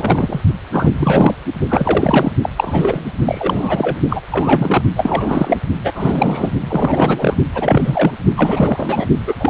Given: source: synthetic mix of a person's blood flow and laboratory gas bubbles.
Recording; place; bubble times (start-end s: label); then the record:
Doppler ultrasound of blood flow; precordium
0.00-0.41 s: bubbles
0.71-1.34 s: bubbles
1.69-2.32 s: bubbles
2.42-2.50 s: bubbles
2.56-3.12 s: bubbles
3.25-3.98 s: bubbles
4.08-4.21 s: bubbles
4.31-4.83 s: bubbles
4.96-5.58 s: bubbles
5.84-6.51 s: bubbles
6.60-7.36 s: bubbles
7.54-8.12 s: bubbles
8.37-9.06 s: bubbles
9.27-9.34 s: bubbles
9.40-9.50 s: bubbles
From the record:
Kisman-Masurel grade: 343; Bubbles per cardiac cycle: rolling drumbeat, 9 or more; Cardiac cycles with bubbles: 100%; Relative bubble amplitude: loud (0.450 to 0.775); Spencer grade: 3 (all of the cardiac periods contain showers or single bubble signals, but not dominating or overriding the cardiac motion signals); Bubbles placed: only in the low amplitude regions of the cardiac cycle